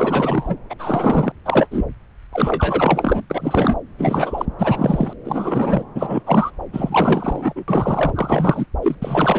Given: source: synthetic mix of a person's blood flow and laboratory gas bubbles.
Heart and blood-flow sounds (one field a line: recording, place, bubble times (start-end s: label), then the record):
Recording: Doppler ultrasound of blood flow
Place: subclavian vein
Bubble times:
0.00-0.56 s: bubbles
0.70-0.74 s: bubbles
0.78-1.32 s: bubbles
1.45-1.67 s: bubbles
1.71-1.84 s: bubbles
2.33-3.22 s: bubbles
3.30-3.77 s: bubbles
3.97-4.46 s: bubbles
4.58-5.13 s: bubbles
5.24-5.83 s: bubbles
5.95-6.22 s: bubbles
6.26-6.51 s: bubbles
6.73-7.64 s: bubbles
7.67-8.66 s: bubbles
8.83-8.95 s: bubbles
9.01-9.39 s: bubbles
From the record:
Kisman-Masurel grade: 343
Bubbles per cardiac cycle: rolling drumbeat, 9 or more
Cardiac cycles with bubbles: 100%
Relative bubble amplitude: loud (0.450 to 0.775)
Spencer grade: 3 (all of the cardiac periods contain showers or single bubble signals, but not dominating or overriding the cardiac motion signals)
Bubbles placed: anywhere in the cardiac cycle